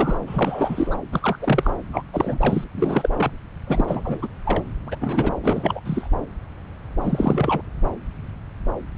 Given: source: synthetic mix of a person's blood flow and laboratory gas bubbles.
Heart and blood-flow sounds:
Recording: Doppler ultrasound of blood flow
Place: subclavian vein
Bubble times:
0.00-0.98 s: bubbles
1.12-1.39 s: bubbles
1.42-1.70 s: bubbles
1.93-2.03 s: bubbles
2.12-2.64 s: bubbles
2.76-3.31 s: bubbles
3.67-4.28 s: bubbles
4.44-4.63 s: bubbles
4.87-4.96 s: bubbles
5.00-5.32 s: bubbles
5.41-5.80 s: bubbles
5.85-6.09 s: bubbles
7.00-7.62 s: bubbles
From the record:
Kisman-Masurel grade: 333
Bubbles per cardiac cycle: rolling drumbeat, 9 or more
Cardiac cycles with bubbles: 50 to 99%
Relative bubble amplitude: loud (0.450 to 0.775)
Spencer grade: 3 (all of the cardiac periods contain showers or single bubble signals, but not dominating or overriding the cardiac motion signals)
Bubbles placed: anywhere in the cardiac cycle

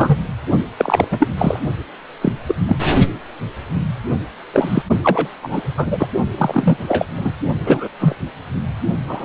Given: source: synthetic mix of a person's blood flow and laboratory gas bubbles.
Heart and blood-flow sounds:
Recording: Doppler ultrasound of blood flow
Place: precordium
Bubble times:
0.00-0.16 s: bubbles
0.76-1.27 s: bubbles
1.38-1.59 s: bubbles
2.22-2.33 s: bubbles
2.48-2.55 s: bubbles
2.67-2.77 s: bubbles
4.54-4.83 s: bubbles
5.04-5.29 s: bubbles
5.42-5.63 s: bubbles
5.76-6.07 s: bubbles
6.38-6.77 s: bubbles
6.88-7.05 s: bubbles
7.17-7.32 s: bubbles
7.64-7.88 s: bubbles
7.98-8.15 s: bubbles
9.06-9.25 s: bubbles
From the record:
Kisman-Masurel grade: 243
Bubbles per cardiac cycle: several, 3 to 8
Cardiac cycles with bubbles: 100%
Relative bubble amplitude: loud (0.450 to 0.775)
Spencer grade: 3 (all of the cardiac periods contain showers or single bubble signals, but not dominating or overriding the cardiac motion signals)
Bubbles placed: only in the low amplitude regions of the cardiac cycle

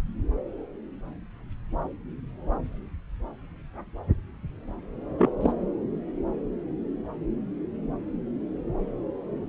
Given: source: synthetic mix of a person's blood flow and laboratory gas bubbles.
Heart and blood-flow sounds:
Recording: Doppler ultrasound of blood flow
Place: subclavian vein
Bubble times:
5.17-5.31 s: bubbles
5.41-5.52 s: bubbles
From the record:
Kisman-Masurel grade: 112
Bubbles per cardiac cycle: 1 to 2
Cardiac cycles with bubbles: 1 to 10%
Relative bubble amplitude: moderate (0.250 to 0.450)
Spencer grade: 1 (occasional bubble signal discernible with the cardiac motion signal, with majority of cardiac periods free of bubbles)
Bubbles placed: anywhere in the cardiac cycle

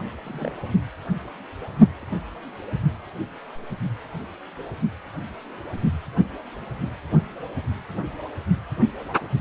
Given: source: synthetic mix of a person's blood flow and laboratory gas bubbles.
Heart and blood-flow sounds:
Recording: Doppler ultrasound of blood flow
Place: precordium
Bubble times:
0.23-0.52 s: bubbles
From the record:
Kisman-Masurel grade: 211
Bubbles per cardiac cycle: several, 3 to 8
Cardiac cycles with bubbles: 1 to 10%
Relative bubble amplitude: barely perceptible (0.100 to 0.250)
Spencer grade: 1 (occasional bubble signal discernible with the cardiac motion signal, with majority of cardiac periods free of bubbles)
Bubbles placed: only in the low amplitude regions of the cardiac cycle

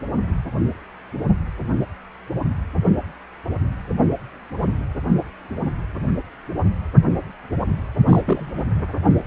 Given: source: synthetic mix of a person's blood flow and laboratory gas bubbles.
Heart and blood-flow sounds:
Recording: Doppler ultrasound of blood flow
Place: precordium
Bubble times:
8.07-8.21 s: bubbles
8.27-8.51 s: bubbles
8.57-8.64 s: bubbles
From the record:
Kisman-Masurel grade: 212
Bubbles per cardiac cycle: several, 3 to 8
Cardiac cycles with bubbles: 1 to 10%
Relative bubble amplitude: moderate (0.250 to 0.450)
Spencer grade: 1 (occasional bubble signal discernible with the cardiac motion signal, with majority of cardiac periods free of bubbles)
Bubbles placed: anywhere in the cardiac cycle

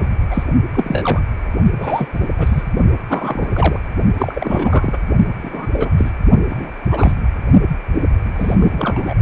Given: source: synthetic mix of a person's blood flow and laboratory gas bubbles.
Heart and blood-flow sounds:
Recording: Doppler ultrasound of blood flow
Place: precordium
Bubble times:
0.00-0.10 s: bubbles
0.31-0.43 s: bubbles
0.74-1.22 s: bubbles
1.78-2.08 s: bubbles
2.12-2.27 s: bubbles
2.38-2.64 s: bubbles
3.09-3.49 s: bubbles
3.53-3.80 s: bubbles
4.18-4.98 s: bubbles
5.42-5.67 s: bubbles
5.72-5.90 s: bubbles
5.96-6.11 s: bubbles
6.50-6.73 s: bubbles
6.90-7.12 s: bubbles
7.92-8.05 s: bubbles
8.25-8.31 s: bubbles
8.34-9.15 s: bubbles
From the record:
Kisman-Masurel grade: 243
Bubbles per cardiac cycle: several, 3 to 8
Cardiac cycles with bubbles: 100%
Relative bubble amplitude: loud (0.450 to 0.775)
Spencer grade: 3 (all of the cardiac periods contain showers or single bubble signals, but not dominating or overriding the cardiac motion signals)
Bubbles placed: only in the low amplitude regions of the cardiac cycle

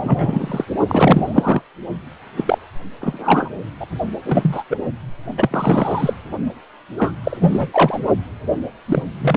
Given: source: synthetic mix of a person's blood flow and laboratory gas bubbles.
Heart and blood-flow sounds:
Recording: Doppler ultrasound of blood flow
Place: precordium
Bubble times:
0.03-0.65 s: bubbles
0.88-1.62 s: bubbles
2.37-2.58 s: bubbles
3.00-3.50 s: bubbles
3.80-3.86 s: bubbles
4.25-4.63 s: bubbles
4.70-4.77 s: bubbles
5.38-6.13 s: bubbles
6.97-7.13 s: bubbles
7.23-7.37 s: bubbles
7.40-7.67 s: bubbles
7.72-7.99 s: bubbles
8.86-9.03 s: bubbles
9.21-9.37 s: bubbles
From the record:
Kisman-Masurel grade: 243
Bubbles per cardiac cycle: several, 3 to 8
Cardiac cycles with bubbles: 100%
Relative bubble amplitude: loud (0.450 to 0.775)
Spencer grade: 3 (all of the cardiac periods contain showers or single bubble signals, but not dominating or overriding the cardiac motion signals)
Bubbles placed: only in the low amplitude regions of the cardiac cycle

